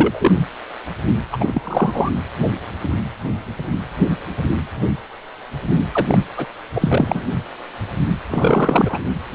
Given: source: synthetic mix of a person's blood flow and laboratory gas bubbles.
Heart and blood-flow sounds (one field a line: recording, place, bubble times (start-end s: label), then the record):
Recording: Doppler ultrasound of blood flow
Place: precordium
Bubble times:
0.00-0.32 s: bubbles
1.32-1.38 s: bubbles
1.40-2.10 s: bubbles
5.92-6.05 s: bubbles
6.08-6.18 s: bubbles
6.37-6.46 s: bubbles
6.75-7.21 s: bubbles
8.29-8.99 s: bubbles
From the record:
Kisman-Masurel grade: 333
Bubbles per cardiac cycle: rolling drumbeat, 9 or more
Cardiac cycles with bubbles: 50 to 99%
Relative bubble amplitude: loud (0.450 to 0.775)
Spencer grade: 3 (all of the cardiac periods contain showers or single bubble signals, but not dominating or overriding the cardiac motion signals)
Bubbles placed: anywhere in the cardiac cycle